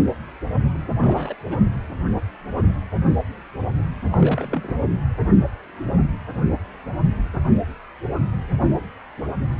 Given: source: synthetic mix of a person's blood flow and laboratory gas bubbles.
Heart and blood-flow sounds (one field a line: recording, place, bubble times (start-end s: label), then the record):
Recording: Doppler ultrasound of blood flow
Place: precordium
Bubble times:
0.99-1.34 s: bubbles
1.45-1.69 s: bubbles
4.13-4.76 s: bubbles
From the record:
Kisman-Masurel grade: 221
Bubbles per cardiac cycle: several, 3 to 8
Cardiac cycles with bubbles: 10 to 50%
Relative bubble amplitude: barely perceptible (0.100 to 0.250)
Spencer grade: 2 (many but less than half of the cardiac periods contain bubble signals, singularly or in groups)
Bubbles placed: anywhere in the cardiac cycle